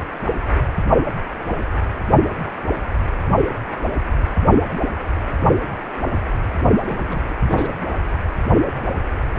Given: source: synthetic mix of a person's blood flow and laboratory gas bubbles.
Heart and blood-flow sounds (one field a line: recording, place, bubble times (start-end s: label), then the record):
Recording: Doppler ultrasound of blood flow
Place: precordium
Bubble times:
3.01-3.05 s: bubbles
6.85-7.35 s: bubbles
7.49-7.72 s: bubbles
From the record:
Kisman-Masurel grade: 121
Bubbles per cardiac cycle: 1 to 2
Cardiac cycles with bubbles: 10 to 50%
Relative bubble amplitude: barely perceptible (0.100 to 0.250)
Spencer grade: 2 (many but less than half of the cardiac periods contain bubble signals, singularly or in groups)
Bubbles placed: only in the low amplitude regions of the cardiac cycle